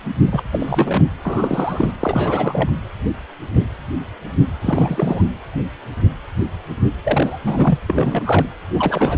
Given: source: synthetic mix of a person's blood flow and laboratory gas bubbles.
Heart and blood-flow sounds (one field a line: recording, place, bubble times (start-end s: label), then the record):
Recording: Doppler ultrasound of blood flow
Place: precordium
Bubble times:
0.27-0.43 s: bubbles
0.52-1.05 s: bubbles
1.23-1.92 s: bubbles
1.99-2.71 s: bubbles
4.61-5.21 s: bubbles
7.03-7.78 s: bubbles
7.88-8.46 s: bubbles
8.73-9.18 s: bubbles
From the record:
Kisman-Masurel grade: 332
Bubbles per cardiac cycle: rolling drumbeat, 9 or more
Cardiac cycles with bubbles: 50 to 99%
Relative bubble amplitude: moderate (0.250 to 0.450)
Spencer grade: 3 (all of the cardiac periods contain showers or single bubble signals, but not dominating or overriding the cardiac motion signals)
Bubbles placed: anywhere in the cardiac cycle